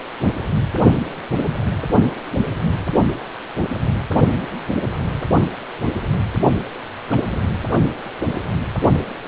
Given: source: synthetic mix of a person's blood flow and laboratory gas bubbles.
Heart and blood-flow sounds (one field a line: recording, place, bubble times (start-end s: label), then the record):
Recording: Doppler ultrasound of blood flow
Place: precordium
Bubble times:
7.11-7.41 s: bubbles
From the record:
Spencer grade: 2 (many but less than half of the cardiac periods contain bubble signals, singularly or in groups)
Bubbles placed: only in the low amplitude regions of the cardiac cycle